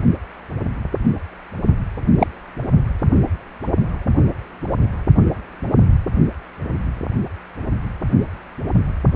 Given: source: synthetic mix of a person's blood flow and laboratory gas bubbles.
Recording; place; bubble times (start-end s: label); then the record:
Doppler ultrasound of blood flow; precordium
2.18-2.27 s: bubbles
From the record:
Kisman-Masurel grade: 123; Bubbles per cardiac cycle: 1 to 2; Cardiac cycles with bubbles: 10 to 50%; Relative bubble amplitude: loud (0.450 to 0.775); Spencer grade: 2 (many but less than half of the cardiac periods contain bubble signals, singularly or in groups); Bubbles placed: only in the low amplitude regions of the cardiac cycle